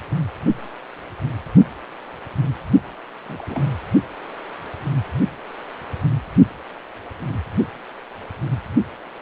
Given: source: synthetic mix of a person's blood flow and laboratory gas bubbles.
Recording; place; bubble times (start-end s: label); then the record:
Doppler ultrasound of blood flow; precordium
3.29-3.66 s: bubbles
From the record:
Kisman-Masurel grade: 221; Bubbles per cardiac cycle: several, 3 to 8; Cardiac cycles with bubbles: 10 to 50%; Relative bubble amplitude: barely perceptible (0.100 to 0.250); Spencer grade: 2 (many but less than half of the cardiac periods contain bubble signals, singularly or in groups); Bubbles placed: only in the low amplitude regions of the cardiac cycle